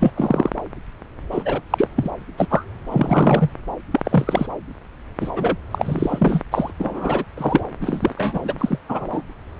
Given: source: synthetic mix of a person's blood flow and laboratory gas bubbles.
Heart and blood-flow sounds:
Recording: Doppler ultrasound of blood flow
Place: subclavian vein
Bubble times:
0.00-0.11 s: bubbles
0.16-0.50 s: bubbles
1.30-1.61 s: bubbles
1.70-1.88 s: bubbles
1.96-2.10 s: bubbles
2.37-2.48 s: bubbles
2.50-2.65 s: bubbles
2.91-3.50 s: bubbles
3.90-4.00 s: bubbles
4.04-4.49 s: bubbles
5.20-5.32 s: bubbles
5.35-5.57 s: bubbles
5.71-6.43 s: bubbles
6.50-6.72 s: bubbles
6.79-7.25 s: bubbles
7.37-7.63 s: bubbles
7.81-8.79 s: bubbles
8.89-9.09 s: bubbles
9.12-9.23 s: bubbles
From the record:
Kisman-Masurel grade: 243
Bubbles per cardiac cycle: several, 3 to 8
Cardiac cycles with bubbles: 100%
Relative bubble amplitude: loud (0.450 to 0.775)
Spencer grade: 3 (all of the cardiac periods contain showers or single bubble signals, but not dominating or overriding the cardiac motion signals)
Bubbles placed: anywhere in the cardiac cycle

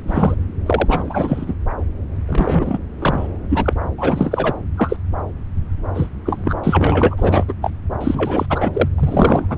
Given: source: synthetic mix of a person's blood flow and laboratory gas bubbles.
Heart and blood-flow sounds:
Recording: Doppler ultrasound of blood flow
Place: subclavian vein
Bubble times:
0.08-0.35 s: bubbles
0.66-1.54 s: bubbles
2.27-2.79 s: bubbles
2.99-3.27 s: bubbles
3.49-3.73 s: bubbles
3.98-4.54 s: bubbles
4.77-4.97 s: bubbles
5.94-6.09 s: bubbles
6.26-6.54 s: bubbles
6.63-7.45 s: bubbles
7.48-7.53 s: bubbles
7.61-7.70 s: bubbles
8.01-8.46 s: bubbles
8.50-8.71 s: bubbles
8.74-8.88 s: bubbles
8.98-9.58 s: bubbles
From the record:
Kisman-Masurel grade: 343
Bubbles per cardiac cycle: rolling drumbeat, 9 or more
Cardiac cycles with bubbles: 100%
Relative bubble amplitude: loud (0.450 to 0.775)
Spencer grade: 3 (all of the cardiac periods contain showers or single bubble signals, but not dominating or overriding the cardiac motion signals)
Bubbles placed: anywhere in the cardiac cycle

